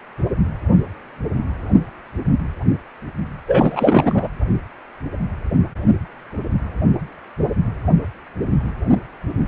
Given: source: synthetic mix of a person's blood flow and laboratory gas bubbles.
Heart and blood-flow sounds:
Doppler ultrasound of blood flow; precordium
3.47-4.27 s: bubbles
From the record:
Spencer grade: 1 (occasional bubble signal discernible with the cardiac motion signal, with majority of cardiac periods free of bubbles); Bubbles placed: anywhere in the cardiac cycle

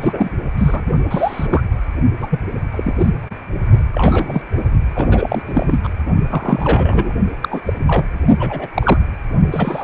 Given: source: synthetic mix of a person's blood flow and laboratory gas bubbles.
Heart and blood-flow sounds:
Doppler ultrasound of blood flow; precordium
0.01-0.30 s: bubbles
0.57-0.83 s: bubbles
1.10-1.62 s: bubbles
2.20-2.40 s: bubbles
2.71-2.94 s: bubbles
2.98-3.09 s: bubbles
3.93-4.42 s: bubbles
4.94-5.42 s: bubbles
5.45-5.79 s: bubbles
5.83-5.89 s: bubbles
6.29-7.13 s: bubbles
7.42-7.61 s: bubbles
7.67-7.73 s: bubbles
7.87-8.05 s: bubbles
8.39-8.68 s: bubbles
8.74-8.99 s: bubbles
9.52-9.84 s: bubbles
From the record:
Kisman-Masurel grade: 243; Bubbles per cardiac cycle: several, 3 to 8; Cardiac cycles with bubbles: 100%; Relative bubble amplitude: loud (0.450 to 0.775); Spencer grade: 3 (all of the cardiac periods contain showers or single bubble signals, but not dominating or overriding the cardiac motion signals); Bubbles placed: only in the low amplitude regions of the cardiac cycle

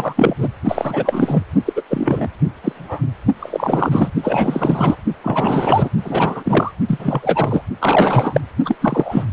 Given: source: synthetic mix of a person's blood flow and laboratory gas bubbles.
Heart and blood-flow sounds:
Doppler ultrasound of blood flow; precordium
0.00-0.35 s: bubbles
0.38-0.48 s: bubbles
0.68-1.44 s: bubbles
1.66-1.73 s: bubbles
1.76-1.81 s: bubbles
1.90-2.27 s: bubbles
2.64-2.72 s: bubbles
2.75-3.01 s: bubbles
3.39-4.12 s: bubbles
4.22-4.96 s: bubbles
5.23-5.90 s: bubbles
6.04-6.71 s: bubbles
6.88-7.62 s: bubbles
7.81-8.40 s: bubbles
8.65-8.75 s: bubbles
8.80-9.25 s: bubbles
From the record:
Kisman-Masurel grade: 343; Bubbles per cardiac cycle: rolling drumbeat, 9 or more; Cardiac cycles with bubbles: 100%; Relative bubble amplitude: loud (0.450 to 0.775); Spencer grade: 3 (all of the cardiac periods contain showers or single bubble signals, but not dominating or overriding the cardiac motion signals); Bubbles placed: only in the low amplitude regions of the cardiac cycle

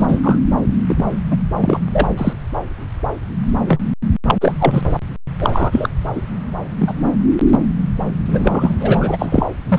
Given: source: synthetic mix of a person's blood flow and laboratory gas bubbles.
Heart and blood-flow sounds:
Doppler ultrasound of blood flow; subclavian vein
0.00-0.39 s: bubbles
0.88-1.05 s: bubbles
1.30-1.38 s: bubbles
1.60-1.80 s: bubbles
1.93-2.09 s: bubbles
2.17-2.33 s: bubbles
3.67-3.80 s: bubbles
4.27-4.34 s: bubbles
4.41-4.53 s: bubbles
4.58-4.83 s: bubbles
5.38-5.89 s: bubbles
6.15-6.22 s: bubbles
6.79-6.93 s: bubbles
8.28-8.75 s: bubbles
8.79-9.46 s: bubbles
9.68-9.79 s: bubbles
From the record:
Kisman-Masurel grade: 333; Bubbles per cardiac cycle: rolling drumbeat, 9 or more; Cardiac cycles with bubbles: 50 to 99%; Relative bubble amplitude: loud (0.450 to 0.775); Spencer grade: 3 (all of the cardiac periods contain showers or single bubble signals, but not dominating or overriding the cardiac motion signals); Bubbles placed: anywhere in the cardiac cycle

